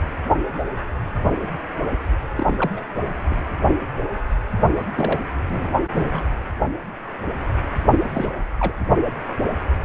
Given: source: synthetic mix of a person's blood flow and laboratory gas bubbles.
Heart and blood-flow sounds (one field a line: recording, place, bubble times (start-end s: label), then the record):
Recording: Doppler ultrasound of blood flow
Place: precordium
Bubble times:
2.35-2.54 s: bubbles
2.58-2.71 s: bubbles
2.76-2.85 s: bubbles
3.30-3.38 s: bubbles
4.76-4.84 s: bubbles
4.95-5.21 s: bubbles
5.50-5.78 s: bubbles
5.88-6.24 s: bubbles
8.00-8.41 s: bubbles
8.59-8.74 s: bubbles
From the record:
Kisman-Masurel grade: 222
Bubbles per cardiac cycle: several, 3 to 8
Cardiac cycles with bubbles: 10 to 50%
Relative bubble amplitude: moderate (0.250 to 0.450)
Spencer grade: 2 (many but less than half of the cardiac periods contain bubble signals, singularly or in groups)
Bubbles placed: anywhere in the cardiac cycle